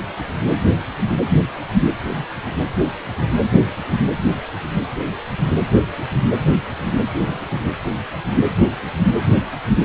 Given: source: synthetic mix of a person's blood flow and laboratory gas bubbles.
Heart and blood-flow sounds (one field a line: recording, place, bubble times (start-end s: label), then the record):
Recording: Doppler ultrasound of blood flow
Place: precordium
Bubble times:
7.22-7.39 s: bubbles
7.50-7.60 s: bubbles
From the record:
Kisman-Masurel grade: 112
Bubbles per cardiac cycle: 1 to 2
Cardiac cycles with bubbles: 1 to 10%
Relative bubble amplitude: moderate (0.250 to 0.450)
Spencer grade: 1 (occasional bubble signal discernible with the cardiac motion signal, with majority of cardiac periods free of bubbles)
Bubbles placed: anywhere in the cardiac cycle